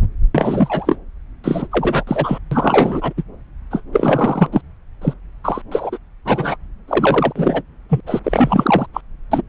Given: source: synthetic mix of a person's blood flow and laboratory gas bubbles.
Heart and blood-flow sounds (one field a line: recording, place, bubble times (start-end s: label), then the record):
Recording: Doppler ultrasound of blood flow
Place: subclavian vein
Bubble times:
0.35-0.98 s: bubbles
1.44-1.67 s: bubbles
1.71-2.04 s: bubbles
2.07-2.39 s: bubbles
2.51-3.13 s: bubbles
3.17-3.23 s: bubbles
3.71-3.81 s: bubbles
3.92-4.49 s: bubbles
4.52-4.62 s: bubbles
5.01-5.13 s: bubbles
5.44-5.62 s: bubbles
5.71-5.97 s: bubbles
6.25-6.56 s: bubbles
6.88-7.33 s: bubbles
7.35-7.62 s: bubbles
7.89-8.01 s: bubbles
8.06-8.20 s: bubbles
8.24-8.87 s: bubbles
8.94-9.01 s: bubbles
9.31-9.41 s: bubbles
From the record:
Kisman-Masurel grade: 333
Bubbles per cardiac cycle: rolling drumbeat, 9 or more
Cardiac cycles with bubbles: 50 to 99%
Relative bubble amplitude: loud (0.450 to 0.775)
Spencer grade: 3 (all of the cardiac periods contain showers or single bubble signals, but not dominating or overriding the cardiac motion signals)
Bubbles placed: anywhere in the cardiac cycle